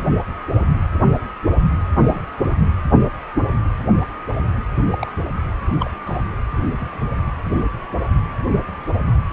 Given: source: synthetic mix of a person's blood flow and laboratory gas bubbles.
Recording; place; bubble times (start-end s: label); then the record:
Doppler ultrasound of blood flow; precordium
2.07-2.23 s: bubbles
4.92-5.12 s: bubbles
5.79-5.90 s: bubbles
6.06-6.22 s: bubbles
6.76-7.09 s: bubbles
From the record:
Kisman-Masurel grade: 122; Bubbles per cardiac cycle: 1 to 2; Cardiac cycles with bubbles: 10 to 50%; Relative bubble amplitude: moderate (0.250 to 0.450); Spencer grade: 2 (many but less than half of the cardiac periods contain bubble signals, singularly or in groups); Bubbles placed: anywhere in the cardiac cycle